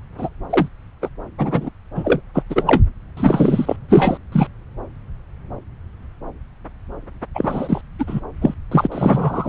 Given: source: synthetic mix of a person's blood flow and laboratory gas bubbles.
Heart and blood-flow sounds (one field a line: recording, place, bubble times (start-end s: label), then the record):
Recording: Doppler ultrasound of blood flow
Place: subclavian vein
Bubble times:
0.17-0.29 s: bubbles
0.50-0.68 s: bubbles
1.02-1.09 s: bubbles
1.38-1.70 s: bubbles
1.95-2.20 s: bubbles
2.33-2.42 s: bubbles
2.49-2.82 s: bubbles
3.17-3.76 s: bubbles
3.89-4.18 s: bubbles
4.32-4.48 s: bubbles
7.35-7.81 s: bubbles
7.98-8.20 s: bubbles
8.41-8.54 s: bubbles
8.71-8.87 s: bubbles
8.92-9.49 s: bubbles
From the record:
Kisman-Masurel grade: 233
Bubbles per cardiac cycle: several, 3 to 8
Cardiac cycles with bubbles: 50 to 99%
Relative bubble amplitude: loud (0.450 to 0.775)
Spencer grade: 3 (all of the cardiac periods contain showers or single bubble signals, but not dominating or overriding the cardiac motion signals)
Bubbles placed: anywhere in the cardiac cycle